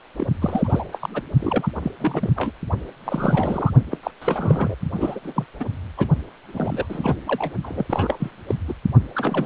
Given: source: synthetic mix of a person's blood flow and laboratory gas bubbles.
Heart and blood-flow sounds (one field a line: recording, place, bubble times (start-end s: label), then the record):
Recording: Doppler ultrasound of blood flow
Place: precordium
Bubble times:
0.18-0.27 s: bubbles
0.41-0.86 s: bubbles
0.92-1.09 s: bubbles
1.14-1.22 s: bubbles
1.40-1.68 s: bubbles
1.82-1.92 s: bubbles
2.00-2.33 s: bubbles
2.35-2.51 s: bubbles
3.04-3.73 s: bubbles
3.91-3.98 s: bubbles
4.03-4.11 s: bubbles
4.21-4.75 s: bubbles
4.96-5.19 s: bubbles
5.23-5.45 s: bubbles
5.59-5.65 s: bubbles
5.97-6.07 s: bubbles
6.52-6.86 s: bubbles
6.89-7.21 s: bubbles
7.27-7.52 s: bubbles
7.62-7.86 s: bubbles
7.90-8.31 s: bubbles
8.48-8.54 s: bubbles
8.68-8.74 s: bubbles
9.15-9.46 s: bubbles
From the record:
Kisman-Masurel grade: 342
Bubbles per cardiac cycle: rolling drumbeat, 9 or more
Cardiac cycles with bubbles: 100%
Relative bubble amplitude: moderate (0.250 to 0.450)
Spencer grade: 3 (all of the cardiac periods contain showers or single bubble signals, but not dominating or overriding the cardiac motion signals)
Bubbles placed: only in the low amplitude regions of the cardiac cycle